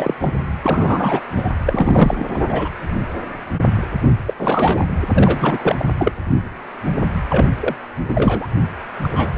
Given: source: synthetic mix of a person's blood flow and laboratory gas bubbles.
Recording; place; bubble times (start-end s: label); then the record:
Doppler ultrasound of blood flow; precordium
0.00-0.15 s: bubbles
0.19-0.32 s: bubbles
0.62-1.21 s: bubbles
1.36-1.50 s: bubbles
1.65-2.46 s: bubbles
2.48-2.69 s: bubbles
4.26-4.34 s: bubbles
4.38-4.87 s: bubbles
5.15-5.75 s: bubbles
5.78-5.85 s: bubbles
5.98-6.12 s: bubbles
7.29-7.45 s: bubbles
7.60-7.75 s: bubbles
8.09-8.47 s: bubbles
9.03-9.38 s: bubbles
From the record:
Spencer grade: 3 (all of the cardiac periods contain showers or single bubble signals, but not dominating or overriding the cardiac motion signals); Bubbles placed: anywhere in the cardiac cycle